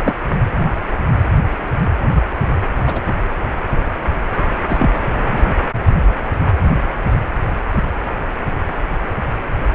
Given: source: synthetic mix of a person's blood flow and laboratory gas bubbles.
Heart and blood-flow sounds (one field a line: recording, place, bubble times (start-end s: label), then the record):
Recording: Doppler ultrasound of blood flow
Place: precordium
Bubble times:
0.04-0.13 s: bubbles
2.86-3.01 s: bubbles
4.69-4.91 s: bubbles
5.22-5.49 s: bubbles
From the record:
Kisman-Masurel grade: 122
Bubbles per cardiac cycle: 1 to 2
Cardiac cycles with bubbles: 10 to 50%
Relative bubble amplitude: moderate (0.250 to 0.450)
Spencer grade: 2 (many but less than half of the cardiac periods contain bubble signals, singularly or in groups)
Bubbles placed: anywhere in the cardiac cycle